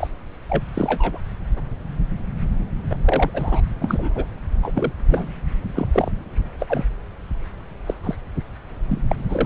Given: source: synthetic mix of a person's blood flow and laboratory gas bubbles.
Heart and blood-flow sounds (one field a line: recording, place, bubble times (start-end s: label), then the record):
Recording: Doppler ultrasound of blood flow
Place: subclavian vein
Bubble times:
0.00-0.08 s: bubbles
0.49-0.63 s: bubbles
0.74-1.18 s: bubbles
2.90-2.98 s: bubbles
3.05-3.31 s: bubbles
3.33-3.61 s: bubbles
3.81-4.25 s: bubbles
4.62-4.72 s: bubbles
4.75-4.92 s: bubbles
5.09-5.30 s: bubbles
5.75-5.88 s: bubbles
5.92-6.12 s: bubbles
6.59-6.85 s: bubbles
7.86-7.94 s: bubbles
8.03-8.15 s: bubbles
8.89-9.01 s: bubbles
9.11-9.15 s: bubbles
9.29-9.45 s: bubbles
From the record:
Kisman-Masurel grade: 232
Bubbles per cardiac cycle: several, 3 to 8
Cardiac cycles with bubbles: 50 to 99%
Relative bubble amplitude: moderate (0.250 to 0.450)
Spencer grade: 3 (all of the cardiac periods contain showers or single bubble signals, but not dominating or overriding the cardiac motion signals)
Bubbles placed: anywhere in the cardiac cycle